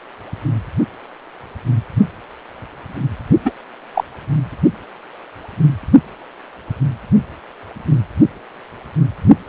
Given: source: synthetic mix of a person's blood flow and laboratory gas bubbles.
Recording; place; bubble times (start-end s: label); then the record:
Doppler ultrasound of blood flow; precordium
3.45-3.51 s: bubbles
3.94-4.04 s: bubbles
From the record:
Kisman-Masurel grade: 113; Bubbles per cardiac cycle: 1 to 2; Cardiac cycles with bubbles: 1 to 10%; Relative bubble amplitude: loud (0.450 to 0.775); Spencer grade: 1 (occasional bubble signal discernible with the cardiac motion signal, with majority of cardiac periods free of bubbles); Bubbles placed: only in the low amplitude regions of the cardiac cycle